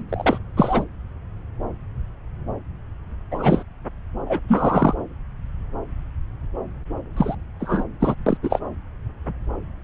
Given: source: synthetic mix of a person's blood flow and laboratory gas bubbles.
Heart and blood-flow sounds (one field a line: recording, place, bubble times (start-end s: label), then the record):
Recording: Doppler ultrasound of blood flow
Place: subclavian vein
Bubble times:
0.00-0.03 s: bubbles
0.09-0.39 s: bubbles
0.56-0.84 s: bubbles
3.31-3.63 s: bubbles
4.25-4.38 s: bubbles
4.48-4.95 s: bubbles
7.17-7.35 s: bubbles
7.59-7.84 s: bubbles
8.00-8.15 s: bubbles
8.26-8.38 s: bubbles
8.42-8.60 s: bubbles
From the record:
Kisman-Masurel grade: 233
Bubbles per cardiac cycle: several, 3 to 8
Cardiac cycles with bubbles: 50 to 99%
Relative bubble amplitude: loud (0.450 to 0.775)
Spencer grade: 3 (all of the cardiac periods contain showers or single bubble signals, but not dominating or overriding the cardiac motion signals)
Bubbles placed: anywhere in the cardiac cycle